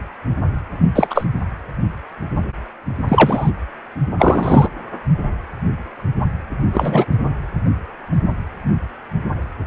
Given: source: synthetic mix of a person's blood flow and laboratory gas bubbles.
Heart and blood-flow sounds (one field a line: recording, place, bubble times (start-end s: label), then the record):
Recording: Doppler ultrasound of blood flow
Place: precordium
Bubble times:
0.95-1.07 s: bubbles
1.10-1.25 s: bubbles
3.08-3.51 s: bubbles
4.18-4.68 s: bubbles
6.73-7.05 s: bubbles
From the record:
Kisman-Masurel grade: 223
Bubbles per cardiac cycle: several, 3 to 8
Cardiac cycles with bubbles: 10 to 50%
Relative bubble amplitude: loud (0.450 to 0.775)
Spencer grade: 2 (many but less than half of the cardiac periods contain bubble signals, singularly or in groups)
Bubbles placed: anywhere in the cardiac cycle